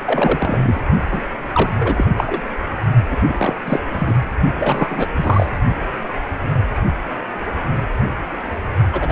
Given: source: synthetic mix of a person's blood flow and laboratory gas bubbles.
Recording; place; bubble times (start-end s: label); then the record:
Doppler ultrasound of blood flow; precordium
0.04-0.80 s: bubbles
1.10-1.21 s: bubbles
1.54-1.73 s: bubbles
1.77-2.04 s: bubbles
2.17-2.42 s: bubbles
3.09-3.17 s: bubbles
3.23-3.54 s: bubbles
3.65-3.79 s: bubbles
3.91-4.15 s: bubbles
4.59-5.08 s: bubbles
5.16-5.46 s: bubbles
8.92-9.12 s: bubbles
From the record:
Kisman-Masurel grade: 333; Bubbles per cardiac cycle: rolling drumbeat, 9 or more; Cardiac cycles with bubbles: 50 to 99%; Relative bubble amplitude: loud (0.450 to 0.775); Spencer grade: 3 (all of the cardiac periods contain showers or single bubble signals, but not dominating or overriding the cardiac motion signals); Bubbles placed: only in the low amplitude regions of the cardiac cycle